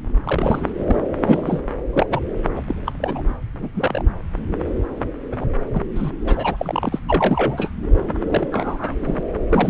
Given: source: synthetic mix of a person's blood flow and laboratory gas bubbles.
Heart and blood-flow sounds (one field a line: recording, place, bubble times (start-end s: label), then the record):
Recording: Doppler ultrasound of blood flow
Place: subclavian vein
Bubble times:
0.24-0.71 s: bubbles
0.86-0.96 s: bubbles
1.17-1.62 s: bubbles
1.93-2.06 s: bubbles
2.10-2.20 s: bubbles
2.57-2.61 s: bubbles
2.67-2.75 s: bubbles
2.85-2.92 s: bubbles
3.00-3.21 s: bubbles
3.59-3.69 s: bubbles
3.74-4.02 s: bubbles
5.32-5.36 s: bubbles
5.41-5.46 s: bubbles
5.74-5.82 s: bubbles
5.95-6.10 s: bubbles
6.25-6.89 s: bubbles
6.92-6.99 s: bubbles
7.06-7.71 s: bubbles
8.28-8.47 s: bubbles
8.52-8.96 s: bubbles
9.00-9.24 s: bubbles
9.49-9.70 s: bubbles
From the record:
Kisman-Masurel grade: 242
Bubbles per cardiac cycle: several, 3 to 8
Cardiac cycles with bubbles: 100%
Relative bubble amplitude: moderate (0.250 to 0.450)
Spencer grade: 3 (all of the cardiac periods contain showers or single bubble signals, but not dominating or overriding the cardiac motion signals)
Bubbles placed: anywhere in the cardiac cycle